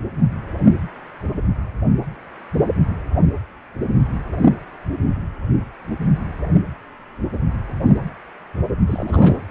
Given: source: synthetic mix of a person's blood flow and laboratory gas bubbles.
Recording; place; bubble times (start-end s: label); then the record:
Doppler ultrasound of blood flow; precordium
8.86-9.42 s: bubbles
From the record:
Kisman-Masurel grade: 211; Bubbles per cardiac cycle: several, 3 to 8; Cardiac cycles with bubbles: 1 to 10%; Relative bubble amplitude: barely perceptible (0.100 to 0.250); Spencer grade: 1 (occasional bubble signal discernible with the cardiac motion signal, with majority of cardiac periods free of bubbles); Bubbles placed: anywhere in the cardiac cycle